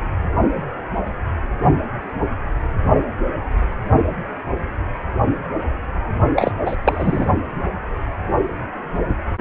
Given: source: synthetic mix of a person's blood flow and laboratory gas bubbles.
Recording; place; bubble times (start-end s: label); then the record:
Doppler ultrasound of blood flow; precordium
6.36-6.51 s: bubbles
6.66-6.75 s: bubbles
6.84-7.25 s: bubbles
From the record:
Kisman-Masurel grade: 213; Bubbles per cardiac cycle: several, 3 to 8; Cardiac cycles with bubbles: 1 to 10%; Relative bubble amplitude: loud (0.450 to 0.775); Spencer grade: 1 (occasional bubble signal discernible with the cardiac motion signal, with majority of cardiac periods free of bubbles); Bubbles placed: only in the low amplitude regions of the cardiac cycle